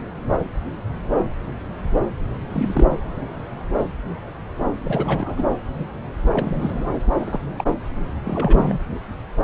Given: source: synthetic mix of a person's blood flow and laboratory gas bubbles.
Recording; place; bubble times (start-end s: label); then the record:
Doppler ultrasound of blood flow; subclavian vein
2.50-2.99 s: bubbles
4.83-5.44 s: bubbles
6.33-6.92 s: bubbles
7.21-7.40 s: bubbles
7.58-7.64 s: bubbles
8.24-8.79 s: bubbles
From the record:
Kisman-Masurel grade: 222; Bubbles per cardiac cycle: several, 3 to 8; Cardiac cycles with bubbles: 10 to 50%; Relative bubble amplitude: moderate (0.250 to 0.450); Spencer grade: 2 (many but less than half of the cardiac periods contain bubble signals, singularly or in groups); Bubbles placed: anywhere in the cardiac cycle